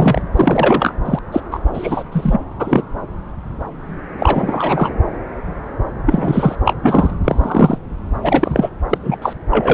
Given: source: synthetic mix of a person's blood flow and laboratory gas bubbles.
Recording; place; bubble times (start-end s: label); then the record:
Doppler ultrasound of blood flow; subclavian vein
0.00-0.21 s: bubbles
0.36-0.94 s: bubbles
1.05-1.19 s: bubbles
1.32-1.41 s: bubbles
1.51-1.60 s: bubbles
1.73-2.04 s: bubbles
2.11-2.40 s: bubbles
2.58-2.82 s: bubbles
4.18-4.93 s: bubbles
6.06-6.55 s: bubbles
6.65-6.73 s: bubbles
6.82-7.10 s: bubbles
7.24-7.78 s: bubbles
8.22-8.70 s: bubbles
8.90-8.98 s: bubbles
9.03-9.17 s: bubbles
9.21-9.33 s: bubbles
9.50-9.74 s: bubbles
From the record:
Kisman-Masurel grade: 233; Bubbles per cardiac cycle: several, 3 to 8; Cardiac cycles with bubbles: 50 to 99%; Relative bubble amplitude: loud (0.450 to 0.775); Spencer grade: 3 (all of the cardiac periods contain showers or single bubble signals, but not dominating or overriding the cardiac motion signals); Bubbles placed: anywhere in the cardiac cycle